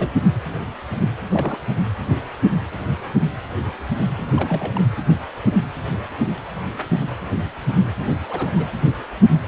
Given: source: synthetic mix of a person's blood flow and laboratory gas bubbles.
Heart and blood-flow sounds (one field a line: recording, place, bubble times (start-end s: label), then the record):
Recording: Doppler ultrasound of blood flow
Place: precordium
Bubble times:
0.00-0.10 s: bubbles
1.28-1.59 s: bubbles
4.18-4.26 s: bubbles
4.33-4.81 s: bubbles
7.99-8.11 s: bubbles
8.28-8.51 s: bubbles
8.56-8.65 s: bubbles
From the record:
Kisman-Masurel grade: 221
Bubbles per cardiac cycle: several, 3 to 8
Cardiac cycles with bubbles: 10 to 50%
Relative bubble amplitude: barely perceptible (0.100 to 0.250)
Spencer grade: 2 (many but less than half of the cardiac periods contain bubble signals, singularly or in groups)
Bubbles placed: anywhere in the cardiac cycle